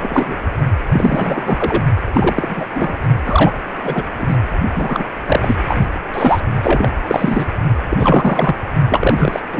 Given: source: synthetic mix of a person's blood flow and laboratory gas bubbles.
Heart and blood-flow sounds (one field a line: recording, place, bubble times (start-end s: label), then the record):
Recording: Doppler ultrasound of blood flow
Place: precordium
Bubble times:
0.01-0.36 s: bubbles
0.91-1.83 s: bubbles
2.13-2.65 s: bubbles
2.75-3.04 s: bubbles
3.25-3.52 s: bubbles
3.83-4.03 s: bubbles
4.18-4.38 s: bubbles
4.75-5.04 s: bubbles
5.27-5.56 s: bubbles
5.67-5.86 s: bubbles
6.13-6.40 s: bubbles
6.63-6.89 s: bubbles
7.07-7.55 s: bubbles
7.89-8.55 s: bubbles
8.89-9.40 s: bubbles
9.53-9.60 s: bubbles
From the record:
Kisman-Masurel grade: 343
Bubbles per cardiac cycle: rolling drumbeat, 9 or more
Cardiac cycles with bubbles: 100%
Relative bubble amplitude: loud (0.450 to 0.775)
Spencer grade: 3 (all of the cardiac periods contain showers or single bubble signals, but not dominating or overriding the cardiac motion signals)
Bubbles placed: only in the low amplitude regions of the cardiac cycle